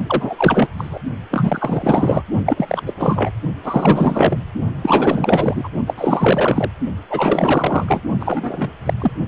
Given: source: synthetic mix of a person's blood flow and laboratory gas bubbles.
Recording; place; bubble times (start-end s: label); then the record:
Doppler ultrasound of blood flow; precordium
0.07-0.67 s: bubbles
0.77-0.99 s: bubbles
1.31-2.23 s: bubbles
2.46-2.82 s: bubbles
2.86-2.94 s: bubbles
2.97-3.31 s: bubbles
3.64-4.36 s: bubbles
4.82-5.69 s: bubbles
5.87-5.93 s: bubbles
5.97-6.69 s: bubbles
7.09-8.02 s: bubbles
8.20-8.72 s: bubbles
8.86-8.94 s: bubbles
9.00-9.12 s: bubbles
From the record:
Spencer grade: 4 (maximum detectable bubble signal sounding continuously throughout systole and diastole of every cardiac period, and overriding the amplitude of the normal cardiac signals); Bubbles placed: only in the low amplitude regions of the cardiac cycle